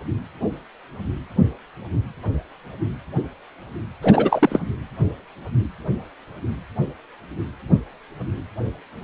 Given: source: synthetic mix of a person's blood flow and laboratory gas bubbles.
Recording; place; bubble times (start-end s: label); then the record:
Doppler ultrasound of blood flow; precordium
4.02-4.60 s: bubbles
From the record:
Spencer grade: 1 (occasional bubble signal discernible with the cardiac motion signal, with majority of cardiac periods free of bubbles); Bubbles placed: anywhere in the cardiac cycle